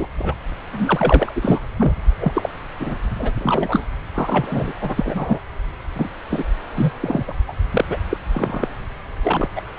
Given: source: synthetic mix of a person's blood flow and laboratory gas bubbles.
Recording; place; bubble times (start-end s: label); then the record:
Doppler ultrasound of blood flow; subclavian vein
0.00-0.06 s: bubbles
0.18-0.34 s: bubbles
0.72-1.68 s: bubbles
1.77-1.92 s: bubbles
2.19-2.49 s: bubbles
2.79-2.96 s: bubbles
3.18-3.32 s: bubbles
3.35-3.86 s: bubbles
4.13-4.73 s: bubbles
4.81-5.39 s: bubbles
5.95-6.11 s: bubbles
6.30-6.46 s: bubbles
6.75-6.91 s: bubbles
7.00-7.24 s: bubbles
7.28-7.33 s: bubbles
7.48-7.53 s: bubbles
7.71-7.84 s: bubbles
7.89-7.97 s: bubbles
8.09-8.17 s: bubbles
8.31-8.68 s: bubbles
9.23-9.48 s: bubbles
9.55-9.62 s: bubbles
From the record:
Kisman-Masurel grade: 243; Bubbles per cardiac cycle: several, 3 to 8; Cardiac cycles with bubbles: 100%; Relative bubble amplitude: loud (0.450 to 0.775); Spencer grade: 3 (all of the cardiac periods contain showers or single bubble signals, but not dominating or overriding the cardiac motion signals); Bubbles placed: anywhere in the cardiac cycle